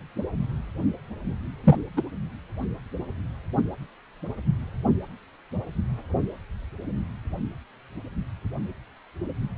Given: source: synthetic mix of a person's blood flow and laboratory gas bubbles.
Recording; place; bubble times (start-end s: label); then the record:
Doppler ultrasound of blood flow; precordium
1.63-1.77 s: bubbles
1.96-2.01 s: bubbles
From the record:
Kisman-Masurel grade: 213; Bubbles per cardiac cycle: several, 3 to 8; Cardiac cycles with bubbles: 1 to 10%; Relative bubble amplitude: loud (0.450 to 0.775); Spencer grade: 1 (occasional bubble signal discernible with the cardiac motion signal, with majority of cardiac periods free of bubbles); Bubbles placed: only in the low amplitude regions of the cardiac cycle